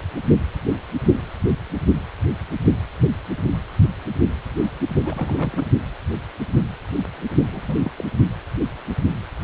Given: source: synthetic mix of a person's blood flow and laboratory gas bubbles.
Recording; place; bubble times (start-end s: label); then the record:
Doppler ultrasound of blood flow; precordium
5.05-5.66 s: bubbles
7.49-7.81 s: bubbles
7.84-7.91 s: bubbles
7.97-8.04 s: bubbles
From the record:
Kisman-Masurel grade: 221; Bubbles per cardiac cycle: several, 3 to 8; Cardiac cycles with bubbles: 10 to 50%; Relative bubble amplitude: barely perceptible (0.100 to 0.250); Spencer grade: 2 (many but less than half of the cardiac periods contain bubble signals, singularly or in groups); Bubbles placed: only in the low amplitude regions of the cardiac cycle